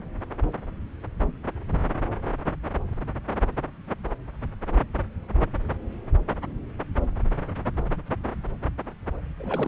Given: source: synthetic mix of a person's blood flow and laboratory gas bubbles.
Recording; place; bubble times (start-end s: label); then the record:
Doppler ultrasound of blood flow; subclavian vein
9.38-9.68 s: bubbles
From the record:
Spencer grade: 1 (occasional bubble signal discernible with the cardiac motion signal, with majority of cardiac periods free of bubbles); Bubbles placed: anywhere in the cardiac cycle